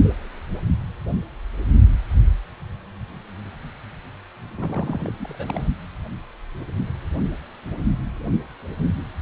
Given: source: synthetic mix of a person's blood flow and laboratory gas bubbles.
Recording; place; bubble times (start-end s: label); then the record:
Doppler ultrasound of blood flow; precordium
4.57-5.12 s: bubbles
5.17-5.67 s: bubbles
From the record:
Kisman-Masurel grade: 211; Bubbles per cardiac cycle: several, 3 to 8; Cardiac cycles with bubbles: 1 to 10%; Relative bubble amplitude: barely perceptible (0.100 to 0.250); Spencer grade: 1 (occasional bubble signal discernible with the cardiac motion signal, with majority of cardiac periods free of bubbles); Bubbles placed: only in the low amplitude regions of the cardiac cycle